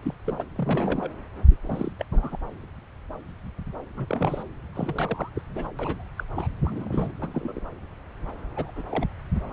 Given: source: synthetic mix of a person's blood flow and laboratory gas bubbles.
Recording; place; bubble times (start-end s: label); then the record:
Doppler ultrasound of blood flow; subclavian vein
0.03-0.14 s: bubbles
0.24-0.45 s: bubbles
0.56-1.10 s: bubbles
1.50-1.55 s: bubbles
1.63-1.93 s: bubbles
1.98-2.04 s: bubbles
2.12-2.38 s: bubbles
3.96-4.43 s: bubbles
4.75-5.29 s: bubbles
5.34-5.42 s: bubbles
5.55-5.67 s: bubbles
5.79-6.08 s: bubbles
6.17-6.23 s: bubbles
6.35-6.47 s: bubbles
6.64-7.18 s: bubbles
7.21-7.60 s: bubbles
8.55-8.71 s: bubbles
8.75-8.84 s: bubbles
8.90-9.06 s: bubbles
9.43-9.53 s: bubbles
From the record:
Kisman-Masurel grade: 232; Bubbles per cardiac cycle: several, 3 to 8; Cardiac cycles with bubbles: 50 to 99%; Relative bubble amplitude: moderate (0.250 to 0.450); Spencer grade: 3 (all of the cardiac periods contain showers or single bubble signals, but not dominating or overriding the cardiac motion signals); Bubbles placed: anywhere in the cardiac cycle